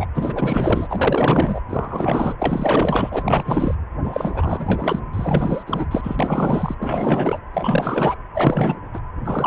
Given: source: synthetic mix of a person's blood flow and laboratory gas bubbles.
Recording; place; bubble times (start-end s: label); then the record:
Doppler ultrasound of blood flow; precordium
0.00-0.06 s: bubbles
0.14-1.60 s: bubbles
1.69-3.75 s: bubbles
4.04-5.00 s: bubbles
5.13-5.63 s: bubbles
5.66-5.87 s: bubbles
5.91-6.17 s: bubbles
6.19-6.75 s: bubbles
6.79-7.39 s: bubbles
7.53-8.16 s: bubbles
8.35-8.80 s: bubbles
8.94-9.00 s: bubbles
9.24-9.47 s: bubbles
From the record:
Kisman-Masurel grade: 444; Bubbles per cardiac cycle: continuous sound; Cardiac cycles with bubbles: 100%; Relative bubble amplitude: maximal (0.775 to 0.999); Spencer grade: 4 (maximum detectable bubble signal sounding continuously throughout systole and diastole of every cardiac period, and overriding the amplitude of the normal cardiac signals); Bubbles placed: anywhere in the cardiac cycle